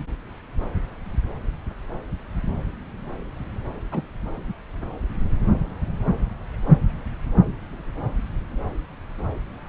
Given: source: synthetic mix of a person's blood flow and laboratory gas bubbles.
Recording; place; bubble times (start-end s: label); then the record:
Doppler ultrasound of blood flow; subclavian vein
3.92-4.01 s: bubbles
From the record:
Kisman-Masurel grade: 122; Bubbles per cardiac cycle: 1 to 2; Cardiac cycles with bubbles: 10 to 50%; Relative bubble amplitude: moderate (0.250 to 0.450); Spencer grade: 2 (many but less than half of the cardiac periods contain bubble signals, singularly or in groups); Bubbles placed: anywhere in the cardiac cycle